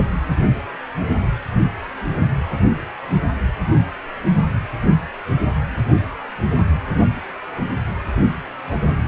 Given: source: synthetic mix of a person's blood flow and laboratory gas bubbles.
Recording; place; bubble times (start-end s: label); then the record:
Doppler ultrasound of blood flow; precordium
4.82-4.93 s: bubbles
From the record:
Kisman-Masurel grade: 112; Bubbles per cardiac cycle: 1 to 2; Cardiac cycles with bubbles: 1 to 10%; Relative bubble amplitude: moderate (0.250 to 0.450); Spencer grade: 1 (occasional bubble signal discernible with the cardiac motion signal, with majority of cardiac periods free of bubbles); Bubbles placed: anywhere in the cardiac cycle